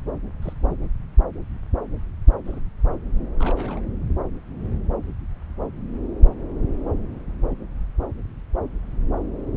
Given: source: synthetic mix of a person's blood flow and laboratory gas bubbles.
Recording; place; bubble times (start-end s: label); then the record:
Doppler ultrasound of blood flow; subclavian vein
0.42-0.53 s: bubbles
0.60-0.74 s: bubbles
2.45-2.60 s: bubbles
3.40-3.82 s: bubbles
From the record:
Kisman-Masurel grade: 121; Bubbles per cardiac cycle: 1 to 2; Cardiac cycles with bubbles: 10 to 50%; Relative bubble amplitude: barely perceptible (0.100 to 0.250); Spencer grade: 2 (many but less than half of the cardiac periods contain bubble signals, singularly or in groups); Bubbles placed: anywhere in the cardiac cycle